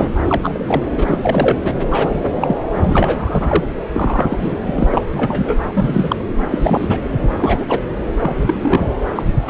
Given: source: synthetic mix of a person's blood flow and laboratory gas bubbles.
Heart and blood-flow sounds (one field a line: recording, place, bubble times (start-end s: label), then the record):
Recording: Doppler ultrasound of blood flow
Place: subclavian vein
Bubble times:
0.00-0.13 s: bubbles
0.27-0.81 s: bubbles
0.97-1.18 s: bubbles
1.22-1.59 s: bubbles
1.64-1.74 s: bubbles
1.90-2.21 s: bubbles
2.25-2.58 s: bubbles
2.76-3.64 s: bubbles
3.92-4.26 s: bubbles
4.29-4.62 s: bubbles
4.65-4.87 s: bubbles
4.90-5.01 s: bubbles
5.11-5.56 s: bubbles
5.67-6.16 s: bubbles
6.50-6.98 s: bubbles
7.37-7.80 s: bubbles
8.17-8.89 s: bubbles
9.15-9.22 s: bubbles
9.27-9.32 s: bubbles
9.47-9.50 s: bubbles
From the record:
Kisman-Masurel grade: 243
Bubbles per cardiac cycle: several, 3 to 8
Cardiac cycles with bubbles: 100%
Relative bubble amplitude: loud (0.450 to 0.775)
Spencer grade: 3 (all of the cardiac periods contain showers or single bubble signals, but not dominating or overriding the cardiac motion signals)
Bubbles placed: anywhere in the cardiac cycle